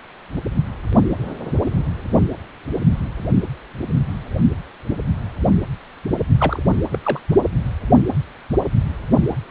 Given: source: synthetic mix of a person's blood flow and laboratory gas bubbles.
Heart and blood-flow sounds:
Doppler ultrasound of blood flow; precordium
6.38-6.62 s: bubbles
6.92-6.99 s: bubbles
7.04-7.19 s: bubbles
From the record:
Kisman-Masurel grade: 122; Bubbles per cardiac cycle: 1 to 2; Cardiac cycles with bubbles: 10 to 50%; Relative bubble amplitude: moderate (0.250 to 0.450); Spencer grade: 2 (many but less than half of the cardiac periods contain bubble signals, singularly or in groups); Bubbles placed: anywhere in the cardiac cycle

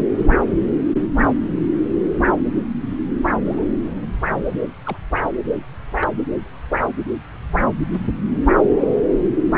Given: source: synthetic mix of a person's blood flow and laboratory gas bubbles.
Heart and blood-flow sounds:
Doppler ultrasound of blood flow; subclavian vein
3.45-3.64 s: bubbles
4.45-4.62 s: bubbles
4.83-4.96 s: bubbles
6.00-6.08 s: bubbles
From the record:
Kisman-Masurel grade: 121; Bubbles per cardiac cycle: 1 to 2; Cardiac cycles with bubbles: 10 to 50%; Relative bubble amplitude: barely perceptible (0.100 to 0.250); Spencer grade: 2 (many but less than half of the cardiac periods contain bubble signals, singularly or in groups); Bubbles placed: anywhere in the cardiac cycle

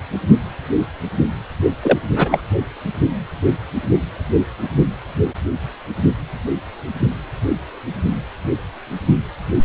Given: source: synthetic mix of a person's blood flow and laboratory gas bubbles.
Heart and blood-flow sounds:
Doppler ultrasound of blood flow; precordium
1.82-1.98 s: bubbles
2.16-2.42 s: bubbles
From the record:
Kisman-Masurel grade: 213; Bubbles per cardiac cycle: several, 3 to 8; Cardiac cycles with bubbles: 1 to 10%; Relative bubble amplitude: loud (0.450 to 0.775); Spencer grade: 1 (occasional bubble signal discernible with the cardiac motion signal, with majority of cardiac periods free of bubbles); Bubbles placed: only in the low amplitude regions of the cardiac cycle

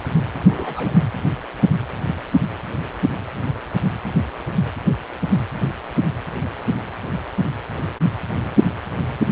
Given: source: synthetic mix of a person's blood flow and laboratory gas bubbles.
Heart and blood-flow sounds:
Doppler ultrasound of blood flow; precordium
0.33-1.03 s: bubbles
From the record:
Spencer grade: 2 (many but less than half of the cardiac periods contain bubble signals, singularly or in groups); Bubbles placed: anywhere in the cardiac cycle

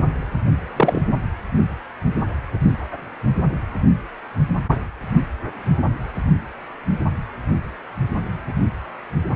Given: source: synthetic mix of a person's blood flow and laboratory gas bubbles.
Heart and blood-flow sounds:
Doppler ultrasound of blood flow; precordium
0.76-1.01 s: bubbles
From the record:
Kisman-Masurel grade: 123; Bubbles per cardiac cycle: 1 to 2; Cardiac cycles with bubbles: 10 to 50%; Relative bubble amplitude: loud (0.450 to 0.775); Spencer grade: 2 (many but less than half of the cardiac periods contain bubble signals, singularly or in groups); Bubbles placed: only in the low amplitude regions of the cardiac cycle

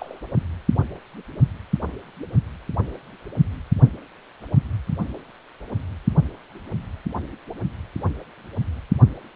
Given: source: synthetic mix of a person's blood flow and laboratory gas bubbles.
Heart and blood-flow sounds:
Doppler ultrasound of blood flow; precordium
0.00-0.20 s: bubbles
From the record:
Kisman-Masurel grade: 111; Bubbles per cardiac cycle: 1 to 2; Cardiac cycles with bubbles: 1 to 10%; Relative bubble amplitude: barely perceptible (0.100 to 0.250); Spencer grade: 1 (occasional bubble signal discernible with the cardiac motion signal, with majority of cardiac periods free of bubbles); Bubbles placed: only in the low amplitude regions of the cardiac cycle

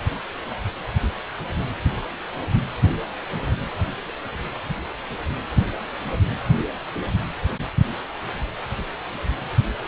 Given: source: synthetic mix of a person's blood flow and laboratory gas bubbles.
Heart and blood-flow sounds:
Doppler ultrasound of blood flow; precordium
no bubbles
From the record:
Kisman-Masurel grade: 000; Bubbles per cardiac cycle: 0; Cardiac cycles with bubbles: 0%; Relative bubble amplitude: no bubbles discernible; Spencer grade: 0 (complete lack of bubble signals)

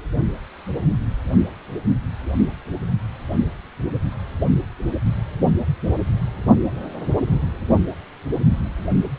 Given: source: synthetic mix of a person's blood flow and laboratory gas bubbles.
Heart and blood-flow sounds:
Doppler ultrasound of blood flow; precordium
no bubbles
From the record:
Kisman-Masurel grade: 000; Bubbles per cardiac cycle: 0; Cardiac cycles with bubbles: 0%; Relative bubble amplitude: no bubbles discernible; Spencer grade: 0 (complete lack of bubble signals)

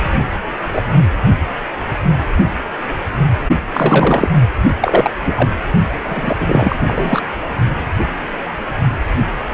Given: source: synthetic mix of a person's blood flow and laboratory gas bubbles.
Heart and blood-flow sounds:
Doppler ultrasound of blood flow; precordium
0.67-0.82 s: bubbles
3.73-4.32 s: bubbles
4.82-5.11 s: bubbles
5.25-5.49 s: bubbles
6.04-7.21 s: bubbles
From the record:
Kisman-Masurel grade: 233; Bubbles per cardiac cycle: several, 3 to 8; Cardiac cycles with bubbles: 50 to 99%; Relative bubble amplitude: loud (0.450 to 0.775); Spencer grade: 3 (all of the cardiac periods contain showers or single bubble signals, but not dominating or overriding the cardiac motion signals); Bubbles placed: only in the low amplitude regions of the cardiac cycle

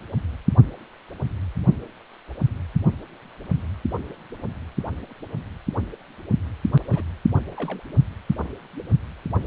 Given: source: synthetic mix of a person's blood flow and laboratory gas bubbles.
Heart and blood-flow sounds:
Doppler ultrasound of blood flow; precordium
6.89-7.03 s: bubbles
7.57-7.82 s: bubbles
From the record:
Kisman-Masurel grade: 221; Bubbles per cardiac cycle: several, 3 to 8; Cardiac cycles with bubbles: 10 to 50%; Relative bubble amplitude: barely perceptible (0.100 to 0.250); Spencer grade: 2 (many but less than half of the cardiac periods contain bubble signals, singularly or in groups); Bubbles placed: only in the low amplitude regions of the cardiac cycle

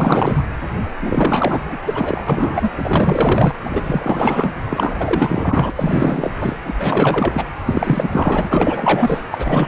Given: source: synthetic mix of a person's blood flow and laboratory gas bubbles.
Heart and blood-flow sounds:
Doppler ultrasound of blood flow; precordium
0.00-0.44 s: bubbles
0.98-1.79 s: bubbles
1.85-2.70 s: bubbles
2.77-3.55 s: bubbles
3.65-4.51 s: bubbles
4.69-5.71 s: bubbles
5.75-6.32 s: bubbles
6.40-6.57 s: bubbles
6.65-7.45 s: bubbles
7.65-9.22 s: bubbles
9.30-9.68 s: bubbles
From the record:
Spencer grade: 4 (maximum detectable bubble signal sounding continuously throughout systole and diastole of every cardiac period, and overriding the amplitude of the normal cardiac signals); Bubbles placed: anywhere in the cardiac cycle

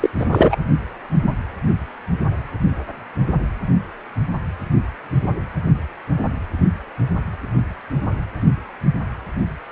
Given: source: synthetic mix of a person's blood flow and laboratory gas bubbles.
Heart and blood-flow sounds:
Doppler ultrasound of blood flow; precordium
0.00-0.10 s: bubbles
0.20-0.26 s: bubbles
0.30-0.56 s: bubbles
From the record:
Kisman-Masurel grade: 213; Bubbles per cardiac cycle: several, 3 to 8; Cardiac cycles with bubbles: 1 to 10%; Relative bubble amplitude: loud (0.450 to 0.775); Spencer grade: 1 (occasional bubble signal discernible with the cardiac motion signal, with majority of cardiac periods free of bubbles); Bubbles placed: anywhere in the cardiac cycle

